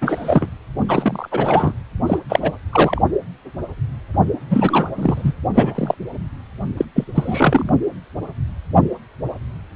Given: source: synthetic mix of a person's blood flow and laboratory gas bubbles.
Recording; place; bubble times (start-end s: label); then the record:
Doppler ultrasound of blood flow; precordium
0.01-0.48 s: bubbles
0.88-1.29 s: bubbles
1.32-1.73 s: bubbles
2.06-2.19 s: bubbles
2.29-2.56 s: bubbles
2.73-3.02 s: bubbles
4.50-4.87 s: bubbles
4.97-5.33 s: bubbles
5.54-5.95 s: bubbles
6.77-6.85 s: bubbles
6.95-7.04 s: bubbles
7.15-7.70 s: bubbles
From the record:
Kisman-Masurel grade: 233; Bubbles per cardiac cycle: several, 3 to 8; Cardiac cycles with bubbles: 50 to 99%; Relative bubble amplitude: loud (0.450 to 0.775); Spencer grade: 3 (all of the cardiac periods contain showers or single bubble signals, but not dominating or overriding the cardiac motion signals); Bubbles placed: only in the low amplitude regions of the cardiac cycle